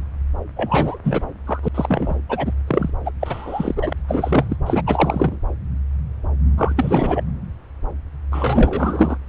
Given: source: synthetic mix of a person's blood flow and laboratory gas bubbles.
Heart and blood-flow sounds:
Doppler ultrasound of blood flow; subclavian vein
0.56-0.98 s: bubbles
1.04-1.23 s: bubbles
1.46-1.60 s: bubbles
1.62-1.69 s: bubbles
1.74-2.18 s: bubbles
2.29-2.52 s: bubbles
2.67-2.90 s: bubbles
3.05-3.12 s: bubbles
3.20-3.93 s: bubbles
4.08-4.56 s: bubbles
4.66-4.82 s: bubbles
4.86-5.38 s: bubbles
6.57-7.23 s: bubbles
8.31-9.17 s: bubbles
From the record:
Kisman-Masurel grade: 333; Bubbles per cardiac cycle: rolling drumbeat, 9 or more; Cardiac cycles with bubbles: 50 to 99%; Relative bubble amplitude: loud (0.450 to 0.775); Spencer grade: 3 (all of the cardiac periods contain showers or single bubble signals, but not dominating or overriding the cardiac motion signals); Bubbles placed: anywhere in the cardiac cycle

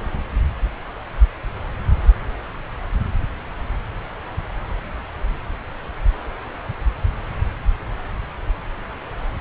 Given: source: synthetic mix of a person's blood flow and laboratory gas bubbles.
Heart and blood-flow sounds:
Doppler ultrasound of blood flow; subclavian vein
no bubbles
From the record:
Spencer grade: 0 (complete lack of bubble signals)

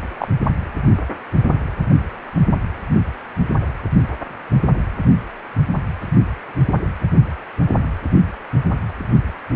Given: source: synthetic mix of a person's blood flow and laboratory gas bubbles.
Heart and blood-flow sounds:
Doppler ultrasound of blood flow; precordium
0.19-0.29 s: bubbles
From the record:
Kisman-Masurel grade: 112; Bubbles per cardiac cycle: 1 to 2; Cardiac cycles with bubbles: 1 to 10%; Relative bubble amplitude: moderate (0.250 to 0.450); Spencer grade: 1 (occasional bubble signal discernible with the cardiac motion signal, with majority of cardiac periods free of bubbles); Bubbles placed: anywhere in the cardiac cycle

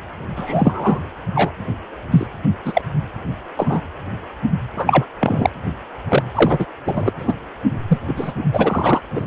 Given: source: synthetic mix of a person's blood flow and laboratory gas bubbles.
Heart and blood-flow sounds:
Doppler ultrasound of blood flow; precordium
0.36-1.00 s: bubbles
1.34-1.51 s: bubbles
2.11-2.26 s: bubbles
2.64-2.82 s: bubbles
3.59-3.81 s: bubbles
4.76-5.05 s: bubbles
5.20-5.50 s: bubbles
6.08-6.22 s: bubbles
6.34-6.65 s: bubbles
6.85-7.12 s: bubbles
7.18-7.34 s: bubbles
7.88-7.98 s: bubbles
8.07-8.32 s: bubbles
8.53-9.00 s: bubbles
9.15-9.25 s: bubbles
From the record:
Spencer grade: 3 (all of the cardiac periods contain showers or single bubble signals, but not dominating or overriding the cardiac motion signals); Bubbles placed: anywhere in the cardiac cycle

